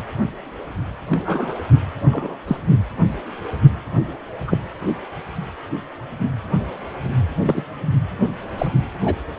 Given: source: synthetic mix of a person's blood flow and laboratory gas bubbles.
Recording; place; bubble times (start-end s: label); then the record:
Doppler ultrasound of blood flow; precordium
1.09-1.54 s: bubbles
2.05-2.38 s: bubbles
2.47-2.56 s: bubbles
4.47-4.57 s: bubbles
7.43-7.62 s: bubbles
8.58-8.68 s: bubbles
9.04-9.15 s: bubbles
From the record:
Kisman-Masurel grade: 122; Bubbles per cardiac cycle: 1 to 2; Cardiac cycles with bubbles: 10 to 50%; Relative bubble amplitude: moderate (0.250 to 0.450); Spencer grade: 2 (many but less than half of the cardiac periods contain bubble signals, singularly or in groups); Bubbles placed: anywhere in the cardiac cycle